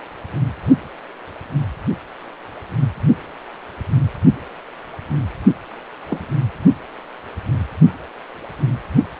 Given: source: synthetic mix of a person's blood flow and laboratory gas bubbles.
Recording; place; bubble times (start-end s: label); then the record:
Doppler ultrasound of blood flow; precordium
6.08-6.25 s: bubbles
From the record:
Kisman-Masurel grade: 112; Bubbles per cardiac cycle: 1 to 2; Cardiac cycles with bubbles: 1 to 10%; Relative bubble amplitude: moderate (0.250 to 0.450); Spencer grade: 1 (occasional bubble signal discernible with the cardiac motion signal, with majority of cardiac periods free of bubbles); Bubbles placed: only in the low amplitude regions of the cardiac cycle